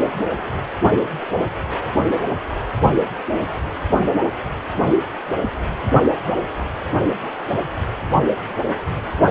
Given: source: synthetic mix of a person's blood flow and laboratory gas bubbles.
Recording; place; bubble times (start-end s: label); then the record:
Doppler ultrasound of blood flow; precordium
no bubbles
From the record:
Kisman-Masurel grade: 000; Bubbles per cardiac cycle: 0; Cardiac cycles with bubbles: 0%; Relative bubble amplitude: no bubbles discernible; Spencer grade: 0 (complete lack of bubble signals)